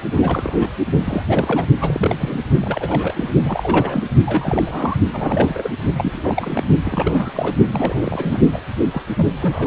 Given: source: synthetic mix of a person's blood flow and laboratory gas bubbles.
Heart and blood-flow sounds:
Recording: Doppler ultrasound of blood flow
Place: precordium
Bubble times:
0.11-0.70 s: bubbles
0.95-1.23 s: bubbles
1.28-1.68 s: bubbles
1.81-2.40 s: bubbles
2.61-3.30 s: bubbles
3.44-4.07 s: bubbles
4.26-4.96 s: bubbles
5.12-5.70 s: bubbles
5.97-6.65 s: bubbles
6.85-7.55 s: bubbles
7.67-8.40 s: bubbles
8.52-8.62 s: bubbles
8.90-9.03 s: bubbles
9.16-9.27 s: bubbles
9.41-9.67 s: bubbles
From the record:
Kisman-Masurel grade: 342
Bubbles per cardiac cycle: rolling drumbeat, 9 or more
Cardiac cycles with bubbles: 100%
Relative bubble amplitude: moderate (0.250 to 0.450)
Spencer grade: 3 (all of the cardiac periods contain showers or single bubble signals, but not dominating or overriding the cardiac motion signals)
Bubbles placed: only in the low amplitude regions of the cardiac cycle

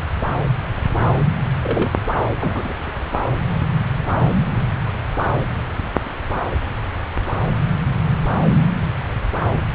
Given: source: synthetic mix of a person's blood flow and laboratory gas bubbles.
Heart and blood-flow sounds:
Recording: Doppler ultrasound of blood flow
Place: subclavian vein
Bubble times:
1.63-1.90 s: bubbles
2.40-2.73 s: bubbles
2.86-2.92 s: bubbles
From the record:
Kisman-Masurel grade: 212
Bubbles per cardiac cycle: several, 3 to 8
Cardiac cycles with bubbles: 1 to 10%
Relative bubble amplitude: moderate (0.250 to 0.450)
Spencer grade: 1 (occasional bubble signal discernible with the cardiac motion signal, with majority of cardiac periods free of bubbles)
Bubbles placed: anywhere in the cardiac cycle

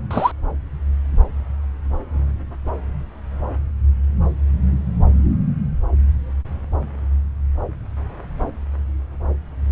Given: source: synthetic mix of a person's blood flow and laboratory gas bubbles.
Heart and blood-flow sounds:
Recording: Doppler ultrasound of blood flow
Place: subclavian vein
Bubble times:
0.11-0.32 s: bubbles
From the record:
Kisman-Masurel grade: 113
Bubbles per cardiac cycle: 1 to 2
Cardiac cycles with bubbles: 1 to 10%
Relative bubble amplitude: loud (0.450 to 0.775)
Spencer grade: 1 (occasional bubble signal discernible with the cardiac motion signal, with majority of cardiac periods free of bubbles)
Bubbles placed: anywhere in the cardiac cycle

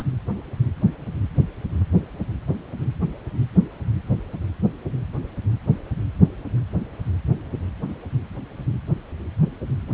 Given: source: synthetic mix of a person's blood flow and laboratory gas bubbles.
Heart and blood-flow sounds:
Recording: Doppler ultrasound of blood flow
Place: precordium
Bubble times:
0.00-0.03 s: bubbles
From the record:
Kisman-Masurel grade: 213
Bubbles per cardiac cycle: several, 3 to 8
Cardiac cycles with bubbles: 1 to 10%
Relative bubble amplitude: loud (0.450 to 0.775)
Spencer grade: 1 (occasional bubble signal discernible with the cardiac motion signal, with majority of cardiac periods free of bubbles)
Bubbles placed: anywhere in the cardiac cycle

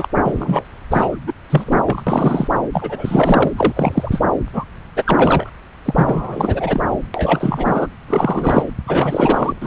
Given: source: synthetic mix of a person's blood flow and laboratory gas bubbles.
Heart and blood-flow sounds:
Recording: Doppler ultrasound of blood flow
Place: subclavian vein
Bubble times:
0.00-0.08 s: bubbles
0.23-0.67 s: bubbles
0.91-1.17 s: bubbles
1.26-1.33 s: bubbles
1.49-2.04 s: bubbles
2.06-2.48 s: bubbles
2.73-3.50 s: bubbles
3.55-4.21 s: bubbles
4.53-4.64 s: bubbles
4.96-5.51 s: bubbles
5.85-6.82 s: bubbles
7.14-7.87 s: bubbles
8.07-8.63 s: bubbles
8.87-9.53 s: bubbles
9.62-9.67 s: bubbles
From the record:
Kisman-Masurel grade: 343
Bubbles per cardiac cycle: rolling drumbeat, 9 or more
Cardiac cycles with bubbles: 100%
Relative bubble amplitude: loud (0.450 to 0.775)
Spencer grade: 3 (all of the cardiac periods contain showers or single bubble signals, but not dominating or overriding the cardiac motion signals)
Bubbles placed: anywhere in the cardiac cycle

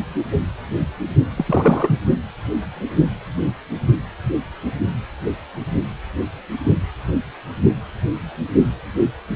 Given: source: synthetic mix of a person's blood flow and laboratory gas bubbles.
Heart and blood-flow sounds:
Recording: Doppler ultrasound of blood flow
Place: precordium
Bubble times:
1.36-1.99 s: bubbles
From the record:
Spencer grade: 1 (occasional bubble signal discernible with the cardiac motion signal, with majority of cardiac periods free of bubbles)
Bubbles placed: only in the low amplitude regions of the cardiac cycle

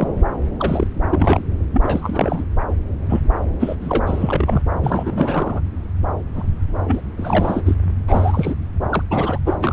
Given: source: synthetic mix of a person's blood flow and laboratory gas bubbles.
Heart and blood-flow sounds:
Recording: Doppler ultrasound of blood flow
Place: subclavian vein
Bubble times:
0.00-0.08 s: bubbles
0.59-0.87 s: bubbles
1.10-1.42 s: bubbles
1.73-2.44 s: bubbles
3.09-3.20 s: bubbles
3.60-3.75 s: bubbles
3.81-4.61 s: bubbles
4.81-5.61 s: bubbles
6.33-6.47 s: bubbles
6.87-7.01 s: bubbles
7.17-7.61 s: bubbles
7.66-7.75 s: bubbles
8.08-8.54 s: bubbles
8.90-9.03 s: bubbles
9.09-9.38 s: bubbles
9.46-9.55 s: bubbles
9.60-9.73 s: bubbles
From the record:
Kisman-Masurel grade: 342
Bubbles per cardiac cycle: rolling drumbeat, 9 or more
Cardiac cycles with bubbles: 100%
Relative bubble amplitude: moderate (0.250 to 0.450)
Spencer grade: 3 (all of the cardiac periods contain showers or single bubble signals, but not dominating or overriding the cardiac motion signals)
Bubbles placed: anywhere in the cardiac cycle

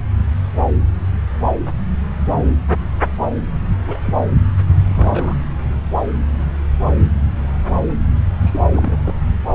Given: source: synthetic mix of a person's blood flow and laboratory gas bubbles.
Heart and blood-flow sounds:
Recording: Doppler ultrasound of blood flow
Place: subclavian vein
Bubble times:
3.86-4.00 s: bubbles
4.04-4.15 s: bubbles
4.88-5.38 s: bubbles
8.42-8.60 s: bubbles
8.72-9.14 s: bubbles
From the record:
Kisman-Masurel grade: 221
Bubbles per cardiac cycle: several, 3 to 8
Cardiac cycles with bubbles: 10 to 50%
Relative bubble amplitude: barely perceptible (0.100 to 0.250)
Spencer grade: 2 (many but less than half of the cardiac periods contain bubble signals, singularly or in groups)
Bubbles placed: anywhere in the cardiac cycle

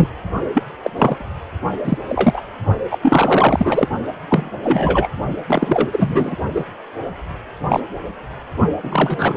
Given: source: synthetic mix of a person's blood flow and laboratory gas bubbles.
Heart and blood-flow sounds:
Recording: Doppler ultrasound of blood flow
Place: precordium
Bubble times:
0.00-0.08 s: bubbles
0.54-0.63 s: bubbles
0.82-0.90 s: bubbles
0.96-1.26 s: bubbles
1.83-1.98 s: bubbles
2.09-2.41 s: bubbles
2.91-2.98 s: bubbles
3.02-3.89 s: bubbles
4.30-4.50 s: bubbles
4.63-5.08 s: bubbles
5.47-5.88 s: bubbles
5.92-6.38 s: bubbles
6.54-6.65 s: bubbles
7.69-7.80 s: bubbles
8.83-9.37 s: bubbles
From the record:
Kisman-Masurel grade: 243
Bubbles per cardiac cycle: several, 3 to 8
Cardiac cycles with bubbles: 100%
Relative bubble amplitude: loud (0.450 to 0.775)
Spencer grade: 3 (all of the cardiac periods contain showers or single bubble signals, but not dominating or overriding the cardiac motion signals)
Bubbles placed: only in the low amplitude regions of the cardiac cycle

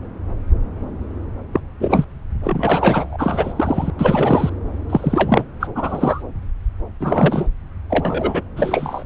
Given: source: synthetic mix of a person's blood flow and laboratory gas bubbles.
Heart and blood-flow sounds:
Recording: Doppler ultrasound of blood flow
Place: subclavian vein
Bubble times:
1.53-1.60 s: bubbles
1.79-2.04 s: bubbles
2.43-3.54 s: bubbles
3.56-3.91 s: bubbles
3.97-4.50 s: bubbles
4.89-5.45 s: bubbles
5.60-5.67 s: bubbles
5.75-6.22 s: bubbles
7.00-7.46 s: bubbles
7.89-8.42 s: bubbles
8.56-9.04 s: bubbles
From the record:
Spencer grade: 3 (all of the cardiac periods contain showers or single bubble signals, but not dominating or overriding the cardiac motion signals)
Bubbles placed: anywhere in the cardiac cycle

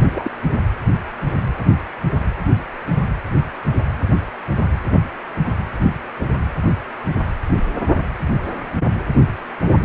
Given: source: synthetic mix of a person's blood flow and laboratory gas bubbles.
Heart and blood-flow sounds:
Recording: Doppler ultrasound of blood flow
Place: precordium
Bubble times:
0.14-0.31 s: bubbles
From the record:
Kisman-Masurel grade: 112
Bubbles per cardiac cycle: 1 to 2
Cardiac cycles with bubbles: 1 to 10%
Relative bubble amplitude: moderate (0.250 to 0.450)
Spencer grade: 1 (occasional bubble signal discernible with the cardiac motion signal, with majority of cardiac periods free of bubbles)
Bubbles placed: anywhere in the cardiac cycle

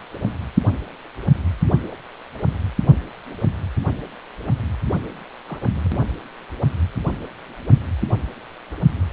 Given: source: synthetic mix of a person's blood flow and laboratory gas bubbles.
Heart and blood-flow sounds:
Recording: Doppler ultrasound of blood flow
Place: precordium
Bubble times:
5.48-5.58 s: bubbles
5.69-6.00 s: bubbles
From the record:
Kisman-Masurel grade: 111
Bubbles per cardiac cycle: 1 to 2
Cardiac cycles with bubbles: 1 to 10%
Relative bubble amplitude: barely perceptible (0.100 to 0.250)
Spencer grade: 1 (occasional bubble signal discernible with the cardiac motion signal, with majority of cardiac periods free of bubbles)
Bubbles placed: anywhere in the cardiac cycle

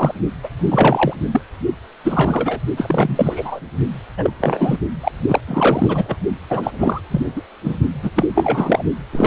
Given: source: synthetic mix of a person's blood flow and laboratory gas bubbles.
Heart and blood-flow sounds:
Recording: Doppler ultrasound of blood flow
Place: precordium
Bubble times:
0.00-0.14 s: bubbles
0.43-0.49 s: bubbles
0.53-1.14 s: bubbles
1.31-1.41 s: bubbles
2.04-2.60 s: bubbles
2.77-3.60 s: bubbles
4.17-4.30 s: bubbles
4.40-4.78 s: bubbles
5.04-5.12 s: bubbles
5.28-5.41 s: bubbles
5.47-6.17 s: bubbles
6.49-6.71 s: bubbles
6.79-7.01 s: bubbles
7.11-7.21 s: bubbles
7.36-7.43 s: bubbles
7.64-7.76 s: bubbles
8.03-8.11 s: bubbles
8.15-8.26 s: bubbles
8.34-8.82 s: bubbles
9.12-9.27 s: bubbles
From the record:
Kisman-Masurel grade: 343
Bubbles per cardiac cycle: rolling drumbeat, 9 or more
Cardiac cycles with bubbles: 100%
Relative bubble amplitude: loud (0.450 to 0.775)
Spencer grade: 3 (all of the cardiac periods contain showers or single bubble signals, but not dominating or overriding the cardiac motion signals)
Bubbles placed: only in the low amplitude regions of the cardiac cycle

